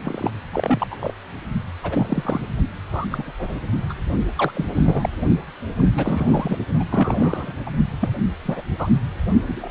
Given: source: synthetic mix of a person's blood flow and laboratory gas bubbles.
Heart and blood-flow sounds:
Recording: Doppler ultrasound of blood flow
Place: precordium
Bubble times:
0.05-0.31 s: bubbles
0.53-0.87 s: bubbles
0.90-1.13 s: bubbles
1.83-2.40 s: bubbles
2.91-3.32 s: bubbles
3.39-3.55 s: bubbles
3.89-3.93 s: bubbles
4.38-4.51 s: bubbles
4.54-4.65 s: bubbles
4.75-5.09 s: bubbles
5.77-5.88 s: bubbles
5.95-6.58 s: bubbles
6.79-6.84 s: bubbles
6.91-7.52 s: bubbles
7.67-7.71 s: bubbles
8.01-8.09 s: bubbles
8.46-8.62 s: bubbles
8.79-8.87 s: bubbles
9.46-9.71 s: bubbles
From the record:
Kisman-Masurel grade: 242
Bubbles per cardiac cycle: several, 3 to 8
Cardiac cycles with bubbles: 100%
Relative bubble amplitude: moderate (0.250 to 0.450)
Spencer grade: 3 (all of the cardiac periods contain showers or single bubble signals, but not dominating or overriding the cardiac motion signals)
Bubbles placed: only in the low amplitude regions of the cardiac cycle

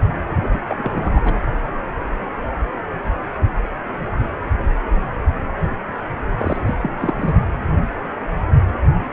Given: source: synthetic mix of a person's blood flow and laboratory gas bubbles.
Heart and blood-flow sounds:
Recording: Doppler ultrasound of blood flow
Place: precordium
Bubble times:
0.43-0.48 s: bubbles
0.51-0.59 s: bubbles
0.69-1.21 s: bubbles
1.24-1.34 s: bubbles
6.39-6.57 s: bubbles
6.67-6.78 s: bubbles
6.82-6.92 s: bubbles
7.00-7.35 s: bubbles
From the record:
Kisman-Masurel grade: 222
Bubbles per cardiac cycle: several, 3 to 8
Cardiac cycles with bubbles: 10 to 50%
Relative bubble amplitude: moderate (0.250 to 0.450)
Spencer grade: 2 (many but less than half of the cardiac periods contain bubble signals, singularly or in groups)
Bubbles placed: anywhere in the cardiac cycle

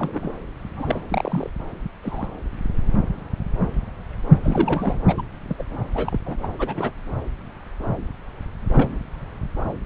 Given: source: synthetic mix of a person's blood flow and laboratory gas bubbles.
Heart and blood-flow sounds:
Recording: Doppler ultrasound of blood flow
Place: subclavian vein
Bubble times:
0.00-0.32 s: bubbles
0.73-1.02 s: bubbles
1.08-1.50 s: bubbles
2.02-2.28 s: bubbles
4.43-4.99 s: bubbles
5.08-5.21 s: bubbles
5.48-5.64 s: bubbles
5.93-6.20 s: bubbles
6.25-6.35 s: bubbles
6.42-6.48 s: bubbles
6.59-6.92 s: bubbles
8.72-8.98 s: bubbles
From the record:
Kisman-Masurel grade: 232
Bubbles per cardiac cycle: several, 3 to 8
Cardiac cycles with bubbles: 50 to 99%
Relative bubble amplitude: moderate (0.250 to 0.450)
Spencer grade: 3 (all of the cardiac periods contain showers or single bubble signals, but not dominating or overriding the cardiac motion signals)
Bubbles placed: anywhere in the cardiac cycle

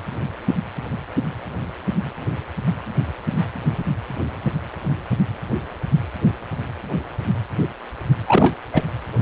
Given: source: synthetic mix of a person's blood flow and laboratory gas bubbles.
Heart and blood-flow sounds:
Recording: Doppler ultrasound of blood flow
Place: precordium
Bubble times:
8.27-8.55 s: bubbles
8.73-8.83 s: bubbles
From the record:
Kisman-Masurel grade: 213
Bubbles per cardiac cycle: several, 3 to 8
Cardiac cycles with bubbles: 1 to 10%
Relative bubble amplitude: loud (0.450 to 0.775)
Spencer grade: 1 (occasional bubble signal discernible with the cardiac motion signal, with majority of cardiac periods free of bubbles)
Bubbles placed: anywhere in the cardiac cycle

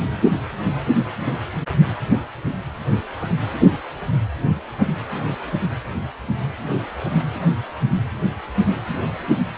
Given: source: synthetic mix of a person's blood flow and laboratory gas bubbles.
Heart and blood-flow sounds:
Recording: Doppler ultrasound of blood flow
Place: precordium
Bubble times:
0.00-0.03 s: bubbles
From the record:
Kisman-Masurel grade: 111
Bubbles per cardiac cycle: 1 to 2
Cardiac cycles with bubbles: 1 to 10%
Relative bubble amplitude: barely perceptible (0.100 to 0.250)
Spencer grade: 1 (occasional bubble signal discernible with the cardiac motion signal, with majority of cardiac periods free of bubbles)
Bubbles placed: only in the low amplitude regions of the cardiac cycle

